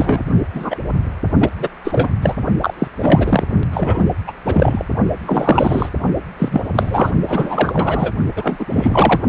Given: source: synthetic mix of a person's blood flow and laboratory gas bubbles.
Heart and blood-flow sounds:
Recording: Doppler ultrasound of blood flow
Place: precordium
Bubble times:
0.00-0.23 s: bubbles
0.54-0.78 s: bubbles
1.39-1.49 s: bubbles
1.59-1.68 s: bubbles
1.84-2.08 s: bubbles
2.21-2.35 s: bubbles
2.61-2.73 s: bubbles
2.78-2.88 s: bubbles
2.98-3.43 s: bubbles
3.73-4.04 s: bubbles
4.27-4.32 s: bubbles
4.45-4.85 s: bubbles
5.25-5.89 s: bubbles
6.38-6.65 s: bubbles
6.75-7.12 s: bubbles
7.24-8.13 s: bubbles
8.36-8.66 s: bubbles
8.69-9.21 s: bubbles
From the record:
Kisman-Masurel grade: 343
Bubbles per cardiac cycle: rolling drumbeat, 9 or more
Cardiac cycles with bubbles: 100%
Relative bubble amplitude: loud (0.450 to 0.775)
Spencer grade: 3 (all of the cardiac periods contain showers or single bubble signals, but not dominating or overriding the cardiac motion signals)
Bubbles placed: only in the low amplitude regions of the cardiac cycle

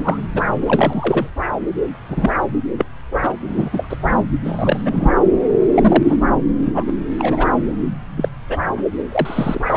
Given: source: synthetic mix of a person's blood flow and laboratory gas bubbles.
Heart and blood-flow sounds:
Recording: Doppler ultrasound of blood flow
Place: subclavian vein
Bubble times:
0.00-0.20 s: bubbles
0.34-0.42 s: bubbles
0.61-1.30 s: bubbles
2.08-2.30 s: bubbles
2.77-2.85 s: bubbles
3.23-3.32 s: bubbles
3.48-3.69 s: bubbles
3.73-3.97 s: bubbles
4.43-5.10 s: bubbles
5.74-6.17 s: bubbles
6.62-6.71 s: bubbles
6.74-6.84 s: bubbles
6.87-6.93 s: bubbles
7.18-7.47 s: bubbles
8.17-8.29 s: bubbles
8.47-8.61 s: bubbles
9.12-9.77 s: bubbles
From the record:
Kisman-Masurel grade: 243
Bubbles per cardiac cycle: several, 3 to 8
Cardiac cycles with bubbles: 100%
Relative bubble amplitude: loud (0.450 to 0.775)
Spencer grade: 3 (all of the cardiac periods contain showers or single bubble signals, but not dominating or overriding the cardiac motion signals)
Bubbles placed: anywhere in the cardiac cycle

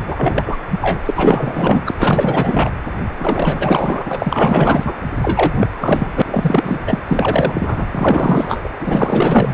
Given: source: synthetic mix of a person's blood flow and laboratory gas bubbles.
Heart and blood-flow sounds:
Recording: Doppler ultrasound of blood flow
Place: precordium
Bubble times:
0.07-0.56 s: bubbles
0.71-1.00 s: bubbles
1.05-1.12 s: bubbles
1.15-1.81 s: bubbles
1.85-1.95 s: bubbles
1.98-2.73 s: bubbles
3.19-4.94 s: bubbles
5.21-6.12 s: bubbles
6.15-6.22 s: bubbles
6.26-6.81 s: bubbles
6.87-6.99 s: bubbles
7.08-7.86 s: bubbles
7.91-8.61 s: bubbles
8.63-8.70 s: bubbles
8.79-9.54 s: bubbles
From the record:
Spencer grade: 4 (maximum detectable bubble signal sounding continuously throughout systole and diastole of every cardiac period, and overriding the amplitude of the normal cardiac signals)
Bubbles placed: anywhere in the cardiac cycle

